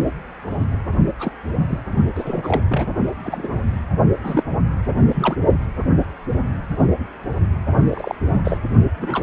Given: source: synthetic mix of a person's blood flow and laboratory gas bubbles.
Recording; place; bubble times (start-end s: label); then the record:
Doppler ultrasound of blood flow; precordium
1.19-1.31 s: bubbles
1.69-1.78 s: bubbles
2.15-2.62 s: bubbles
2.68-2.87 s: bubbles
3.24-3.49 s: bubbles
4.23-4.43 s: bubbles
5.08-5.35 s: bubbles
7.88-8.15 s: bubbles
8.45-8.57 s: bubbles
8.98-9.23 s: bubbles
From the record:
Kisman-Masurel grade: 232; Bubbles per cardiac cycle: several, 3 to 8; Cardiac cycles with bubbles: 50 to 99%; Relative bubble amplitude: moderate (0.250 to 0.450); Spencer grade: 3 (all of the cardiac periods contain showers or single bubble signals, but not dominating or overriding the cardiac motion signals); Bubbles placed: only in the low amplitude regions of the cardiac cycle